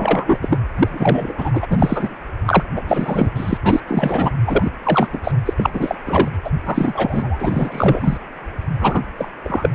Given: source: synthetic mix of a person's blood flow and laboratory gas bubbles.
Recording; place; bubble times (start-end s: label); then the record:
Doppler ultrasound of blood flow; precordium
0.00-0.39 s: bubbles
0.41-0.57 s: bubbles
0.78-1.33 s: bubbles
1.37-1.50 s: bubbles
1.53-1.66 s: bubbles
1.70-2.15 s: bubbles
2.45-2.63 s: bubbles
2.75-2.82 s: bubbles
2.86-3.30 s: bubbles
3.35-3.58 s: bubbles
3.62-3.80 s: bubbles
3.87-4.31 s: bubbles
4.47-4.71 s: bubbles
4.83-5.08 s: bubbles
5.12-5.20 s: bubbles
5.24-5.32 s: bubbles
5.45-5.54 s: bubbles
5.57-5.70 s: bubbles
5.73-5.95 s: bubbles
6.05-6.29 s: bubbles
6.44-6.51 s: bubbles
6.65-7.38 s: bubbles
7.40-8.17 s: bubbles
8.80-9.01 s: bubbles
9.18-9.29 s: bubbles
9.45-9.70 s: bubbles
From the record:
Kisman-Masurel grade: 343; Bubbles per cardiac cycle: rolling drumbeat, 9 or more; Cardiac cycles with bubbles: 100%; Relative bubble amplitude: loud (0.450 to 0.775); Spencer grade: 3 (all of the cardiac periods contain showers or single bubble signals, but not dominating or overriding the cardiac motion signals); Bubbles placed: anywhere in the cardiac cycle